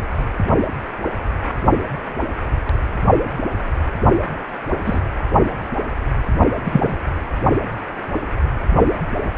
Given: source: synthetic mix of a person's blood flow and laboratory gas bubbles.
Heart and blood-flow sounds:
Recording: Doppler ultrasound of blood flow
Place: precordium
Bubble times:
4.86-5.01 s: bubbles
6.65-6.97 s: bubbles
From the record:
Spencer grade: 2 (many but less than half of the cardiac periods contain bubble signals, singularly or in groups)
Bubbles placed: only in the low amplitude regions of the cardiac cycle

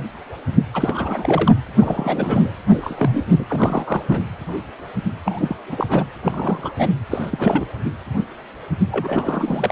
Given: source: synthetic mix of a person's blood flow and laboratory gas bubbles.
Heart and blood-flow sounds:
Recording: Doppler ultrasound of blood flow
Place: precordium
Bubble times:
0.73-1.52 s: bubbles
1.78-2.57 s: bubbles
2.68-3.24 s: bubbles
3.26-3.46 s: bubbles
3.50-4.03 s: bubbles
4.08-4.25 s: bubbles
5.25-5.56 s: bubbles
5.68-5.87 s: bubbles
5.89-6.06 s: bubbles
6.23-6.72 s: bubbles
6.79-6.90 s: bubbles
7.10-7.65 s: bubbles
8.91-9.72 s: bubbles
From the record:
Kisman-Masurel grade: 332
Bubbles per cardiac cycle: rolling drumbeat, 9 or more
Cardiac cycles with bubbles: 50 to 99%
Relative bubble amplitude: moderate (0.250 to 0.450)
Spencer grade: 3 (all of the cardiac periods contain showers or single bubble signals, but not dominating or overriding the cardiac motion signals)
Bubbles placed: anywhere in the cardiac cycle

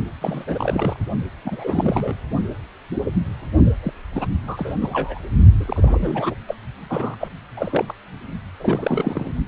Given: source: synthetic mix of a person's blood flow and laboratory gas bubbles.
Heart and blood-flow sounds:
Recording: Doppler ultrasound of blood flow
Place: precordium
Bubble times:
0.21-0.97 s: bubbles
1.45-2.14 s: bubbles
3.83-3.93 s: bubbles
4.13-4.27 s: bubbles
4.46-4.73 s: bubbles
4.81-5.19 s: bubbles
5.60-6.35 s: bubbles
6.48-6.54 s: bubbles
6.89-7.15 s: bubbles
7.19-7.29 s: bubbles
7.56-7.94 s: bubbles
8.60-9.33 s: bubbles
From the record:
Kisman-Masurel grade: 332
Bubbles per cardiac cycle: rolling drumbeat, 9 or more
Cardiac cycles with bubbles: 50 to 99%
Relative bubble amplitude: moderate (0.250 to 0.450)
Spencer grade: 3 (all of the cardiac periods contain showers or single bubble signals, but not dominating or overriding the cardiac motion signals)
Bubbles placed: only in the low amplitude regions of the cardiac cycle

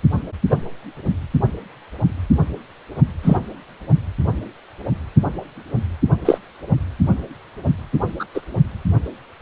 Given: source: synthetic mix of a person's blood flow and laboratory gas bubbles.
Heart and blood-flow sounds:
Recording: Doppler ultrasound of blood flow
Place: precordium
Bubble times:
0.49-0.56 s: bubbles
3.23-3.37 s: bubbles
6.25-6.38 s: bubbles
8.19-8.25 s: bubbles
8.34-8.41 s: bubbles
From the record:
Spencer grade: 2 (many but less than half of the cardiac periods contain bubble signals, singularly or in groups)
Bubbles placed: only in the low amplitude regions of the cardiac cycle

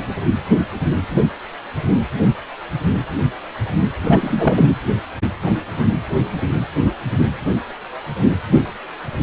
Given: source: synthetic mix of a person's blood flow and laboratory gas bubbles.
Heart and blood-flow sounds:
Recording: Doppler ultrasound of blood flow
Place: precordium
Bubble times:
4.04-4.75 s: bubbles
From the record:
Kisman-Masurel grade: 213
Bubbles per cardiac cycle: several, 3 to 8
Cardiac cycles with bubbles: 1 to 10%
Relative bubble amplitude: loud (0.450 to 0.775)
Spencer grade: 1 (occasional bubble signal discernible with the cardiac motion signal, with majority of cardiac periods free of bubbles)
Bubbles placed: anywhere in the cardiac cycle

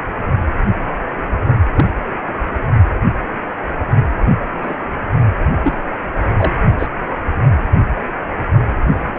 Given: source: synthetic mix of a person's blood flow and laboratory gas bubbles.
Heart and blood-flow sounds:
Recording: Doppler ultrasound of blood flow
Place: precordium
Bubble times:
1.75-1.85 s: bubbles
4.62-4.75 s: bubbles
5.63-5.74 s: bubbles
6.37-6.53 s: bubbles
6.79-6.87 s: bubbles
9.14-9.19 s: bubbles
From the record:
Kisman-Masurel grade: 122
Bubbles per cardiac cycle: 1 to 2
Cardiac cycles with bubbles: 10 to 50%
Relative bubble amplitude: moderate (0.250 to 0.450)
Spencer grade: 2 (many but less than half of the cardiac periods contain bubble signals, singularly or in groups)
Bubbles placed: only in the low amplitude regions of the cardiac cycle

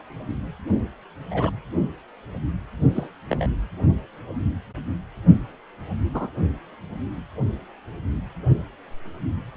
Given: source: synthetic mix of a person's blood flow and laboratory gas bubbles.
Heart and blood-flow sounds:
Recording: Doppler ultrasound of blood flow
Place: precordium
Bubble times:
0.00-0.02 s: bubbles
1.31-1.50 s: bubbles
2.94-3.07 s: bubbles
3.29-3.46 s: bubbles
6.14-6.31 s: bubbles
From the record:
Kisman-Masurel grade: 121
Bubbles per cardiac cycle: 1 to 2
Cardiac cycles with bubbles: 10 to 50%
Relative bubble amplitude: barely perceptible (0.100 to 0.250)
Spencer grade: 2 (many but less than half of the cardiac periods contain bubble signals, singularly or in groups)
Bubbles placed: only in the low amplitude regions of the cardiac cycle

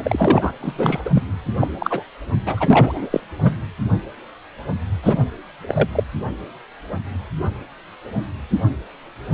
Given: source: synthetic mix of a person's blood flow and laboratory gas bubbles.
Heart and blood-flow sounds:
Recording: Doppler ultrasound of blood flow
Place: precordium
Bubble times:
0.00-0.53 s: bubbles
0.60-1.10 s: bubbles
1.15-1.24 s: bubbles
1.59-1.68 s: bubbles
1.78-2.03 s: bubbles
2.46-3.20 s: bubbles
3.38-3.57 s: bubbles
5.02-5.25 s: bubbles
5.67-5.88 s: bubbles
5.92-6.04 s: bubbles
From the record:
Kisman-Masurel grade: 233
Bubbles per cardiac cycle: several, 3 to 8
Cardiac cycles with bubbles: 50 to 99%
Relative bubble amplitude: loud (0.450 to 0.775)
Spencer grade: 3 (all of the cardiac periods contain showers or single bubble signals, but not dominating or overriding the cardiac motion signals)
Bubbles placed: anywhere in the cardiac cycle

